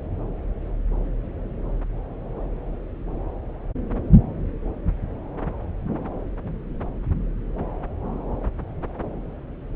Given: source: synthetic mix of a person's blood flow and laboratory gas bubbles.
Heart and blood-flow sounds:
Doppler ultrasound of blood flow; subclavian vein
no bubbles
From the record:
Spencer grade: 0 (complete lack of bubble signals)

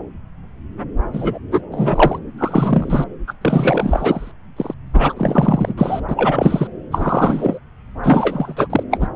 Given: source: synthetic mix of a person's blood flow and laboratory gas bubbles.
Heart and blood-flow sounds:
Doppler ultrasound of blood flow; subclavian vein
1.12-1.38 s: bubbles
1.52-1.61 s: bubbles
1.72-2.19 s: bubbles
2.38-3.05 s: bubbles
3.27-3.33 s: bubbles
3.41-4.32 s: bubbles
4.56-4.74 s: bubbles
4.94-5.14 s: bubbles
5.17-5.74 s: bubbles
5.78-6.00 s: bubbles
6.08-6.67 s: bubbles
6.92-7.59 s: bubbles
8.03-8.67 s: bubbles
8.69-8.83 s: bubbles
8.90-8.97 s: bubbles
9.00-9.07 s: bubbles
From the record:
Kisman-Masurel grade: 343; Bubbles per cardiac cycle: rolling drumbeat, 9 or more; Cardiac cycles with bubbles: 100%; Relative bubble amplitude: loud (0.450 to 0.775); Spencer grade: 3 (all of the cardiac periods contain showers or single bubble signals, but not dominating or overriding the cardiac motion signals); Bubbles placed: anywhere in the cardiac cycle

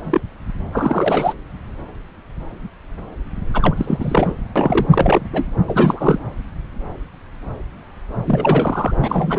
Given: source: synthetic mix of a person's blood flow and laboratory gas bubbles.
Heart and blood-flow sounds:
Doppler ultrasound of blood flow; subclavian vein
0.00-0.21 s: bubbles
0.72-1.33 s: bubbles
3.54-4.35 s: bubbles
4.55-4.86 s: bubbles
4.92-5.28 s: bubbles
5.32-5.46 s: bubbles
5.67-6.19 s: bubbles
8.26-8.92 s: bubbles
9.02-9.39 s: bubbles
From the record:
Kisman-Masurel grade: 332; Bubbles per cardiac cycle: rolling drumbeat, 9 or more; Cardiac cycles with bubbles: 50 to 99%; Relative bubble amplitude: moderate (0.250 to 0.450); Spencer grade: 3 (all of the cardiac periods contain showers or single bubble signals, but not dominating or overriding the cardiac motion signals); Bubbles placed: anywhere in the cardiac cycle

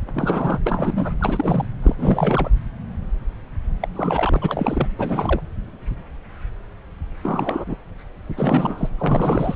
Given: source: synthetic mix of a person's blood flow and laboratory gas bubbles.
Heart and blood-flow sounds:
Doppler ultrasound of blood flow; subclavian vein
0.14-0.60 s: bubbles
0.65-1.14 s: bubbles
1.20-1.68 s: bubbles
1.82-1.95 s: bubbles
1.98-2.49 s: bubbles
3.81-3.88 s: bubbles
3.95-4.88 s: bubbles
4.98-5.41 s: bubbles
7.23-7.75 s: bubbles
8.37-8.89 s: bubbles
8.98-9.55 s: bubbles
From the record:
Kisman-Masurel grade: 332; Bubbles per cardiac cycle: rolling drumbeat, 9 or more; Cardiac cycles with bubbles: 50 to 99%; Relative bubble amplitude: moderate (0.250 to 0.450); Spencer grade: 3 (all of the cardiac periods contain showers or single bubble signals, but not dominating or overriding the cardiac motion signals); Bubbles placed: anywhere in the cardiac cycle

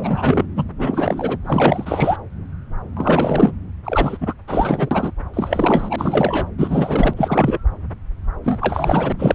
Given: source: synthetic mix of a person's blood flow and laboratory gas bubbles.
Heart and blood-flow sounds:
Doppler ultrasound of blood flow; subclavian vein
0.00-0.46 s: bubbles
0.56-0.64 s: bubbles
0.78-1.38 s: bubbles
1.45-2.17 s: bubbles
2.96-3.52 s: bubbles
3.84-4.17 s: bubbles
4.21-4.33 s: bubbles
4.47-5.11 s: bubbles
5.33-6.47 s: bubbles
6.58-7.13 s: bubbles
7.17-7.59 s: bubbles
8.45-9.12 s: bubbles
9.19-9.35 s: bubbles
From the record:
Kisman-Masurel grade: 333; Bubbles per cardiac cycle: rolling drumbeat, 9 or more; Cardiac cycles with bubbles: 50 to 99%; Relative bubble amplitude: loud (0.450 to 0.775); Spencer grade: 3 (all of the cardiac periods contain showers or single bubble signals, but not dominating or overriding the cardiac motion signals); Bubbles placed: anywhere in the cardiac cycle

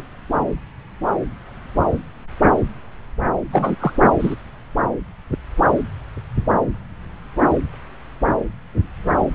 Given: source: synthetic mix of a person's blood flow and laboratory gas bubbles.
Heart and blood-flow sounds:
Doppler ultrasound of blood flow; subclavian vein
0.00-0.04 s: bubbles
3.52-3.75 s: bubbles
3.80-3.93 s: bubbles
4.18-4.35 s: bubbles
From the record:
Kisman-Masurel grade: 123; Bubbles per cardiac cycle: 1 to 2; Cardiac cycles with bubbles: 10 to 50%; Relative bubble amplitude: loud (0.450 to 0.775); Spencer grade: 2 (many but less than half of the cardiac periods contain bubble signals, singularly or in groups); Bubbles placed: anywhere in the cardiac cycle

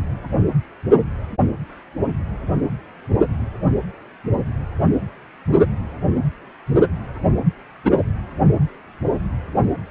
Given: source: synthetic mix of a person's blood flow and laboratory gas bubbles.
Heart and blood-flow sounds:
Doppler ultrasound of blood flow; precordium
7.85-7.92 s: bubbles
From the record:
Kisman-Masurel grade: 123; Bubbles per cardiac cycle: 1 to 2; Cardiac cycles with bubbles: 10 to 50%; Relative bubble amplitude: loud (0.450 to 0.775); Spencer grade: 2 (many but less than half of the cardiac periods contain bubble signals, singularly or in groups); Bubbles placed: anywhere in the cardiac cycle

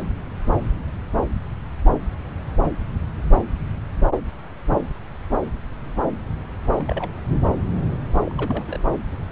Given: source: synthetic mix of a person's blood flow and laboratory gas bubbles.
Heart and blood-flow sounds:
Doppler ultrasound of blood flow; subclavian vein
6.76-7.11 s: bubbles
8.26-8.64 s: bubbles
8.68-8.78 s: bubbles
From the record:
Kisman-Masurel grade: 221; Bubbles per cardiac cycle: several, 3 to 8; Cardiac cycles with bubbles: 10 to 50%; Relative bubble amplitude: barely perceptible (0.100 to 0.250); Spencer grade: 2 (many but less than half of the cardiac periods contain bubble signals, singularly or in groups); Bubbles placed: anywhere in the cardiac cycle

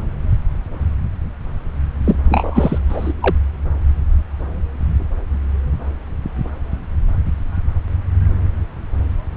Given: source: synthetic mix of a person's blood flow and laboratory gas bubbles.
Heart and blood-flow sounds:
Doppler ultrasound of blood flow; subclavian vein
2.04-2.16 s: bubbles
2.29-2.78 s: bubbles
2.88-3.13 s: bubbles
3.21-3.35 s: bubbles
From the record:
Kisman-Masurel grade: 213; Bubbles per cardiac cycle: several, 3 to 8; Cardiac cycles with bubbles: 1 to 10%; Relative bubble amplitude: loud (0.450 to 0.775); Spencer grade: 1 (occasional bubble signal discernible with the cardiac motion signal, with majority of cardiac periods free of bubbles); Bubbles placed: anywhere in the cardiac cycle

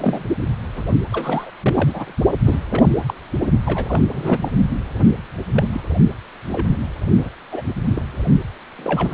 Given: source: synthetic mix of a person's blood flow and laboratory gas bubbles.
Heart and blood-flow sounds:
Doppler ultrasound of blood flow; precordium
0.00-0.25 s: bubbles
0.40-0.47 s: bubbles
0.77-0.83 s: bubbles
1.11-1.51 s: bubbles
1.61-2.13 s: bubbles
2.45-2.59 s: bubbles
2.69-2.83 s: bubbles
3.06-3.14 s: bubbles
3.65-4.02 s: bubbles
4.12-4.50 s: bubbles
4.94-5.08 s: bubbles
5.56-5.68 s: bubbles
5.72-5.81 s: bubbles
6.52-6.78 s: bubbles
7.18-7.29 s: bubbles
7.52-7.62 s: bubbles
7.90-8.02 s: bubbles
8.77-9.14 s: bubbles
From the record:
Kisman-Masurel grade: 242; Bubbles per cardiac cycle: several, 3 to 8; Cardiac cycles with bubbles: 100%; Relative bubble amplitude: moderate (0.250 to 0.450); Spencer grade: 3 (all of the cardiac periods contain showers or single bubble signals, but not dominating or overriding the cardiac motion signals); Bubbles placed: only in the low amplitude regions of the cardiac cycle

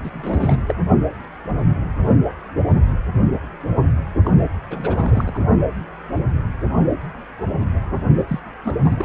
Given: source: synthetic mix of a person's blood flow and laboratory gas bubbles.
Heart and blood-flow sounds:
Doppler ultrasound of blood flow; precordium
0.03-0.10 s: bubbles
0.13-0.62 s: bubbles
0.67-0.75 s: bubbles
4.25-4.30 s: bubbles
4.71-5.38 s: bubbles
8.27-8.39 s: bubbles
8.63-8.76 s: bubbles
8.83-9.05 s: bubbles
From the record:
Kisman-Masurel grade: 232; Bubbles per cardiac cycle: several, 3 to 8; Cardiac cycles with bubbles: 50 to 99%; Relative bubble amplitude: moderate (0.250 to 0.450); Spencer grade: 3 (all of the cardiac periods contain showers or single bubble signals, but not dominating or overriding the cardiac motion signals); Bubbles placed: only in the low amplitude regions of the cardiac cycle

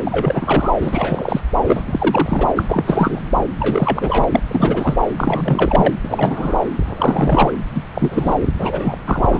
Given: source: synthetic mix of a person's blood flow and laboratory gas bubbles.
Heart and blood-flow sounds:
Doppler ultrasound of blood flow; subclavian vein
0.07-0.71 s: bubbles
0.81-1.40 s: bubbles
1.66-2.47 s: bubbles
2.56-2.63 s: bubbles
2.69-3.21 s: bubbles
3.60-4.25 s: bubbles
4.31-4.40 s: bubbles
4.47-4.97 s: bubbles
5.17-5.90 s: bubbles
6.02-6.61 s: bubbles
6.76-7.53 s: bubbles
7.74-7.83 s: bubbles
7.94-8.35 s: bubbles
8.40-8.49 s: bubbles
8.59-8.98 s: bubbles
9.05-9.40 s: bubbles
From the record:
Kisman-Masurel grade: 343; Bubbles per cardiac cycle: rolling drumbeat, 9 or more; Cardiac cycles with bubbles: 100%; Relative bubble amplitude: loud (0.450 to 0.775); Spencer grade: 3 (all of the cardiac periods contain showers or single bubble signals, but not dominating or overriding the cardiac motion signals); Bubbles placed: anywhere in the cardiac cycle

